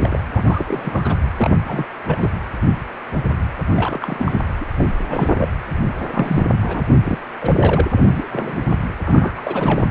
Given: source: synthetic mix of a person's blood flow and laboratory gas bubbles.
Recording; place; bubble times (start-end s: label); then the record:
Doppler ultrasound of blood flow; precordium
0.00-0.25 s: bubbles
0.34-1.15 s: bubbles
1.37-1.50 s: bubbles
1.67-1.85 s: bubbles
2.06-2.38 s: bubbles
3.75-4.44 s: bubbles
4.60-4.65 s: bubbles
4.78-4.88 s: bubbles
5.09-5.47 s: bubbles
5.98-6.45 s: bubbles
6.62-6.82 s: bubbles
6.98-7.18 s: bubbles
7.41-7.90 s: bubbles
7.96-8.04 s: bubbles
8.07-8.79 s: bubbles
9.04-9.32 s: bubbles
9.37-9.41 s: bubbles
9.44-9.86 s: bubbles
From the record:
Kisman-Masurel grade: 332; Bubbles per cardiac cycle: rolling drumbeat, 9 or more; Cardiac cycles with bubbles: 50 to 99%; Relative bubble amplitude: moderate (0.250 to 0.450); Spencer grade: 3 (all of the cardiac periods contain showers or single bubble signals, but not dominating or overriding the cardiac motion signals); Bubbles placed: anywhere in the cardiac cycle